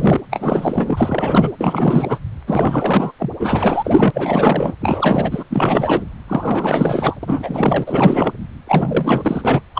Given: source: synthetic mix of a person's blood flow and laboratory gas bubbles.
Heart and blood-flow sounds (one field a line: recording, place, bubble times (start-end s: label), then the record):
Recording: Doppler ultrasound of blood flow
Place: precordium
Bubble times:
0.00-0.21 s: bubbles
0.30-1.51 s: bubbles
1.58-2.19 s: bubbles
2.47-3.12 s: bubbles
3.19-3.30 s: bubbles
3.39-4.11 s: bubbles
4.14-4.74 s: bubbles
4.81-5.43 s: bubbles
5.50-6.05 s: bubbles
6.28-7.17 s: bubbles
7.23-8.33 s: bubbles
8.67-9.61 s: bubbles
9.74-9.80 s: bubbles
From the record:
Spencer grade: 4 (maximum detectable bubble signal sounding continuously throughout systole and diastole of every cardiac period, and overriding the amplitude of the normal cardiac signals)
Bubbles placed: anywhere in the cardiac cycle